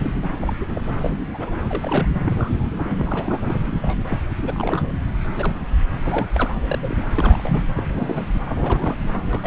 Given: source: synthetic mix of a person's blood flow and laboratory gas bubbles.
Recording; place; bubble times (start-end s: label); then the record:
Doppler ultrasound of blood flow; subclavian vein
0.01-0.11 s: bubbles
0.41-0.54 s: bubbles
0.60-0.65 s: bubbles
0.75-0.80 s: bubbles
1.02-1.12 s: bubbles
1.33-1.55 s: bubbles
1.68-2.08 s: bubbles
2.25-2.69 s: bubbles
2.92-3.58 s: bubbles
3.83-3.97 s: bubbles
4.07-4.17 s: bubbles
4.39-4.82 s: bubbles
5.36-5.59 s: bubbles
6.03-6.26 s: bubbles
6.34-6.54 s: bubbles
6.66-7.05 s: bubbles
7.15-7.62 s: bubbles
7.76-7.84 s: bubbles
7.87-8.26 s: bubbles
8.48-8.96 s: bubbles
9.30-9.47 s: bubbles
From the record:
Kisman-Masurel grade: 232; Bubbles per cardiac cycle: several, 3 to 8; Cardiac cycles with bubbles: 50 to 99%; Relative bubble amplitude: moderate (0.250 to 0.450); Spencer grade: 3 (all of the cardiac periods contain showers or single bubble signals, but not dominating or overriding the cardiac motion signals); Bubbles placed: anywhere in the cardiac cycle